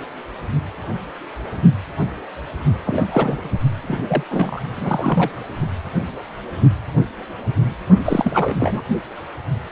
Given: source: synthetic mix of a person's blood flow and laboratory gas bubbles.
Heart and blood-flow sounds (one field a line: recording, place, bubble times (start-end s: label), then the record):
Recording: Doppler ultrasound of blood flow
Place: precordium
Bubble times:
2.84-3.50 s: bubbles
3.83-4.24 s: bubbles
4.30-4.62 s: bubbles
4.75-5.32 s: bubbles
8.04-8.55 s: bubbles
8.60-8.82 s: bubbles
From the record:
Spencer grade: 2 (many but less than half of the cardiac periods contain bubble signals, singularly or in groups)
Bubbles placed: only in the low amplitude regions of the cardiac cycle